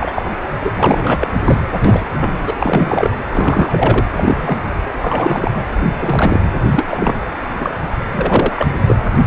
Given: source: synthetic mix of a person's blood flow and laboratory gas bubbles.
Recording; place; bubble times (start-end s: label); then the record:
Doppler ultrasound of blood flow; precordium
0.00-0.23 s: bubbles
0.25-0.30 s: bubbles
0.63-0.71 s: bubbles
0.79-1.28 s: bubbles
1.45-1.63 s: bubbles
1.84-2.05 s: bubbles
2.19-2.38 s: bubbles
2.46-2.54 s: bubbles
2.58-3.10 s: bubbles
3.31-4.07 s: bubbles
4.16-4.58 s: bubbles
5.00-5.51 s: bubbles
5.54-5.62 s: bubbles
6.01-6.41 s: bubbles
6.71-7.29 s: bubbles
7.60-7.75 s: bubbles
8.10-8.52 s: bubbles
8.56-8.68 s: bubbles
8.75-8.96 s: bubbles
From the record:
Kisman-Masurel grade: 243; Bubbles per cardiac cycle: several, 3 to 8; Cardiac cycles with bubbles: 100%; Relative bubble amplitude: loud (0.450 to 0.775); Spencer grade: 3 (all of the cardiac periods contain showers or single bubble signals, but not dominating or overriding the cardiac motion signals); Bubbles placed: anywhere in the cardiac cycle